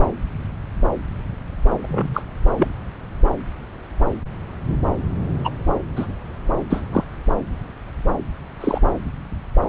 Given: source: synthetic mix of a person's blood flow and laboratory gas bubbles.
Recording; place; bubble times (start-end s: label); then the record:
Doppler ultrasound of blood flow; subclavian vein
1.83-2.23 s: bubbles
2.58-2.67 s: bubbles
5.44-5.50 s: bubbles
5.96-6.06 s: bubbles
6.70-6.83 s: bubbles
6.93-7.04 s: bubbles
8.60-8.80 s: bubbles
From the record:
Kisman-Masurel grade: 122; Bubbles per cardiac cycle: 1 to 2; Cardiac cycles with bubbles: 10 to 50%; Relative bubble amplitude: moderate (0.250 to 0.450); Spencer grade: 2 (many but less than half of the cardiac periods contain bubble signals, singularly or in groups); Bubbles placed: anywhere in the cardiac cycle